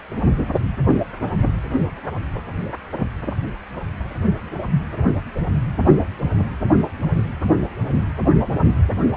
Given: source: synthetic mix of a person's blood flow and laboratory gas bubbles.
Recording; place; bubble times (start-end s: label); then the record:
Doppler ultrasound of blood flow; precordium
no bubbles
From the record:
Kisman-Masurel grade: 000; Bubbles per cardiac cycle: 0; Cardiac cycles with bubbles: 0%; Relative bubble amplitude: no bubbles discernible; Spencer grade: 0 (complete lack of bubble signals)